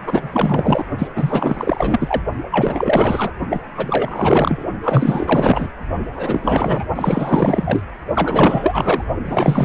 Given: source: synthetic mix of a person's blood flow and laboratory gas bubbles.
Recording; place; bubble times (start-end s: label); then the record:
Doppler ultrasound of blood flow; precordium
0.06-0.85 s: bubbles
0.98-1.07 s: bubbles
1.16-2.22 s: bubbles
2.51-3.32 s: bubbles
3.49-3.60 s: bubbles
3.77-4.64 s: bubbles
4.83-5.67 s: bubbles
6.12-6.84 s: bubbles
6.95-7.82 s: bubbles
8.14-9.05 s: bubbles
9.25-9.65 s: bubbles
From the record:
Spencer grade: 4 (maximum detectable bubble signal sounding continuously throughout systole and diastole of every cardiac period, and overriding the amplitude of the normal cardiac signals); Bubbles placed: only in the low amplitude regions of the cardiac cycle